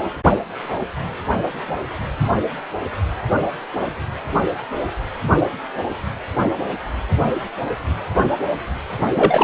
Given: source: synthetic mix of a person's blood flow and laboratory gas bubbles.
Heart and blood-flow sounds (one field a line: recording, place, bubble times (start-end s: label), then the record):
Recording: Doppler ultrasound of blood flow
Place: precordium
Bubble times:
9.15-9.44 s: bubbles
From the record:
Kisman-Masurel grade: 213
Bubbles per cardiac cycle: several, 3 to 8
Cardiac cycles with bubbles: 1 to 10%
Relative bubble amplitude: loud (0.450 to 0.775)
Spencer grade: 1 (occasional bubble signal discernible with the cardiac motion signal, with majority of cardiac periods free of bubbles)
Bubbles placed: anywhere in the cardiac cycle